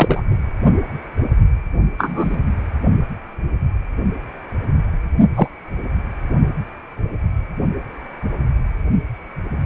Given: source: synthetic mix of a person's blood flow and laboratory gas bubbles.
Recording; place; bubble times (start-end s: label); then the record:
Doppler ultrasound of blood flow; precordium
0.00-0.21 s: bubbles
1.98-2.38 s: bubbles
5.35-5.47 s: bubbles
From the record:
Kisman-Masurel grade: 123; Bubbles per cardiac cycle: 1 to 2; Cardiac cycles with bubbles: 10 to 50%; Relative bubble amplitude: loud (0.450 to 0.775); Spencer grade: 2 (many but less than half of the cardiac periods contain bubble signals, singularly or in groups); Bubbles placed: only in the low amplitude regions of the cardiac cycle